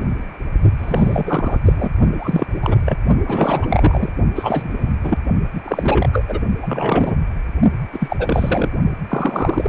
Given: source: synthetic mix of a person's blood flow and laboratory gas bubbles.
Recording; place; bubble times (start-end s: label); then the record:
Doppler ultrasound of blood flow; precordium
0.78-1.58 s: bubbles
1.65-1.90 s: bubbles
2.19-2.46 s: bubbles
2.62-2.75 s: bubbles
2.85-2.96 s: bubbles
3.26-4.12 s: bubbles
4.35-4.95 s: bubbles
5.03-5.18 s: bubbles
5.54-5.62 s: bubbles
5.64-6.10 s: bubbles
6.12-6.24 s: bubbles
6.28-6.40 s: bubbles
6.62-7.16 s: bubbles
7.93-8.71 s: bubbles
9.09-9.69 s: bubbles
From the record:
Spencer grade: 3 (all of the cardiac periods contain showers or single bubble signals, but not dominating or overriding the cardiac motion signals); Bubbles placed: only in the low amplitude regions of the cardiac cycle